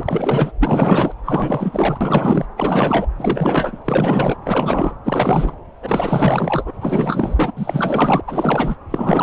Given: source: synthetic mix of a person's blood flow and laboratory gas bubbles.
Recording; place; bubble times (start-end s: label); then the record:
Doppler ultrasound of blood flow; subclavian vein
0.00-0.52 s: bubbles
0.60-1.14 s: bubbles
1.26-1.97 s: bubbles
2.00-2.46 s: bubbles
2.57-3.08 s: bubbles
3.18-3.82 s: bubbles
3.84-4.38 s: bubbles
4.44-4.94 s: bubbles
5.04-5.54 s: bubbles
5.83-6.71 s: bubbles
6.80-7.52 s: bubbles
7.56-8.21 s: bubbles
8.27-8.76 s: bubbles
8.90-9.23 s: bubbles
From the record:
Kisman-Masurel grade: 444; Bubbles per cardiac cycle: continuous sound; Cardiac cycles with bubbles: 100%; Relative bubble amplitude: maximal (0.775 to 0.999); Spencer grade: 4 (maximum detectable bubble signal sounding continuously throughout systole and diastole of every cardiac period, and overriding the amplitude of the normal cardiac signals); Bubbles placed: anywhere in the cardiac cycle